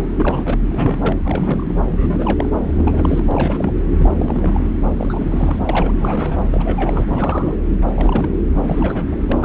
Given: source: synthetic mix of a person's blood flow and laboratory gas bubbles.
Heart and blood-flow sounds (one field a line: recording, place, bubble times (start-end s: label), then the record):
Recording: Doppler ultrasound of blood flow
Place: subclavian vein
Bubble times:
0.00-0.09 s: bubbles
0.14-0.58 s: bubbles
0.69-1.16 s: bubbles
1.23-1.79 s: bubbles
1.90-2.51 s: bubbles
2.67-3.25 s: bubbles
3.31-3.73 s: bubbles
3.98-4.67 s: bubbles
4.96-5.59 s: bubbles
5.69-5.94 s: bubbles
6.00-6.41 s: bubbles
6.52-7.05 s: bubbles
7.08-7.58 s: bubbles
7.81-7.85 s: bubbles
7.94-8.29 s: bubbles
8.62-9.16 s: bubbles
9.28-9.45 s: bubbles
From the record:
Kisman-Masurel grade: 342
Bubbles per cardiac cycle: rolling drumbeat, 9 or more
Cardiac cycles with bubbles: 100%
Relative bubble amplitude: moderate (0.250 to 0.450)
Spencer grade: 3 (all of the cardiac periods contain showers or single bubble signals, but not dominating or overriding the cardiac motion signals)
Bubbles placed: anywhere in the cardiac cycle